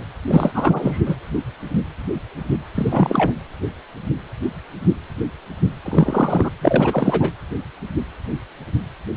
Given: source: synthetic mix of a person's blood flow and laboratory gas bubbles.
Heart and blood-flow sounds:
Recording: Doppler ultrasound of blood flow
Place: precordium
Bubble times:
0.27-1.16 s: bubbles
2.75-3.30 s: bubbles
5.84-6.51 s: bubbles
6.61-7.33 s: bubbles
From the record:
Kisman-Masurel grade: 223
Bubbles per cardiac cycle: several, 3 to 8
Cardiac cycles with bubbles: 10 to 50%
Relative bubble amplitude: loud (0.450 to 0.775)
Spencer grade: 2 (many but less than half of the cardiac periods contain bubble signals, singularly or in groups)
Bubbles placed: anywhere in the cardiac cycle

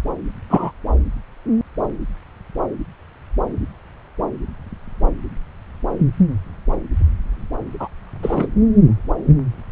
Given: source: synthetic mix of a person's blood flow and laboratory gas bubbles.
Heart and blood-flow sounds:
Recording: Doppler ultrasound of blood flow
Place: subclavian vein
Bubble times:
0.49-0.71 s: bubbles
7.79-7.88 s: bubbles
8.23-8.48 s: bubbles
From the record:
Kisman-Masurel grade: 123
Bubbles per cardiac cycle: 1 to 2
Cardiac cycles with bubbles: 10 to 50%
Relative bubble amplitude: loud (0.450 to 0.775)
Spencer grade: 2 (many but less than half of the cardiac periods contain bubble signals, singularly or in groups)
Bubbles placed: anywhere in the cardiac cycle

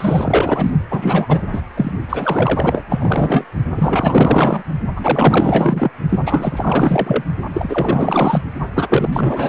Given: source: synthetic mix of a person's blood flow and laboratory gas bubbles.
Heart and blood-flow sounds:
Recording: Doppler ultrasound of blood flow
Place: precordium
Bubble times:
0.00-0.70 s: bubbles
0.91-1.43 s: bubbles
1.53-1.61 s: bubbles
1.76-1.91 s: bubbles
2.09-2.82 s: bubbles
2.90-3.45 s: bubbles
3.75-4.63 s: bubbles
4.96-5.90 s: bubbles
6.09-7.24 s: bubbles
7.54-8.44 s: bubbles
8.74-9.49 s: bubbles
From the record:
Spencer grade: 4 (maximum detectable bubble signal sounding continuously throughout systole and diastole of every cardiac period, and overriding the amplitude of the normal cardiac signals)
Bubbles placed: only in the low amplitude regions of the cardiac cycle

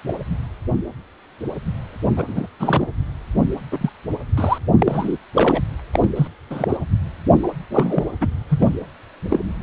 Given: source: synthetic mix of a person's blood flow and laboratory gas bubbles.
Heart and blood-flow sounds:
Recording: Doppler ultrasound of blood flow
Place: precordium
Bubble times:
0.07-0.12 s: bubbles
2.17-2.25 s: bubbles
2.27-2.47 s: bubbles
2.60-2.87 s: bubbles
3.71-3.90 s: bubbles
4.37-4.58 s: bubbles
4.79-5.17 s: bubbles
5.34-5.61 s: bubbles
5.93-6.09 s: bubbles
6.15-6.27 s: bubbles
6.50-6.76 s: bubbles
7.40-7.50 s: bubbles
7.70-8.04 s: bubbles
8.21-8.28 s: bubbles
8.49-8.75 s: bubbles
9.29-9.40 s: bubbles
From the record:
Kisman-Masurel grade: 233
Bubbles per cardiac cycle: several, 3 to 8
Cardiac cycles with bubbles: 50 to 99%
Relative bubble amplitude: loud (0.450 to 0.775)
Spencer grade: 3 (all of the cardiac periods contain showers or single bubble signals, but not dominating or overriding the cardiac motion signals)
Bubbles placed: anywhere in the cardiac cycle

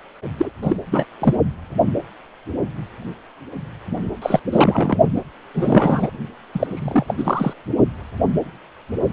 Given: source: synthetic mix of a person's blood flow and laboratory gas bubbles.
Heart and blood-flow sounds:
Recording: Doppler ultrasound of blood flow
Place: precordium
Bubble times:
0.37-0.49 s: bubbles
0.62-0.76 s: bubbles
0.92-1.05 s: bubbles
1.20-1.34 s: bubbles
4.21-4.40 s: bubbles
4.51-4.97 s: bubbles
5.16-5.21 s: bubbles
5.54-6.10 s: bubbles
6.54-7.15 s: bubbles
7.17-7.54 s: bubbles
From the record:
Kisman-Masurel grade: 333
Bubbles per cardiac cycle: rolling drumbeat, 9 or more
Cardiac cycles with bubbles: 50 to 99%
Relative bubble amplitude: loud (0.450 to 0.775)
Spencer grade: 3 (all of the cardiac periods contain showers or single bubble signals, but not dominating or overriding the cardiac motion signals)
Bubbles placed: only in the low amplitude regions of the cardiac cycle

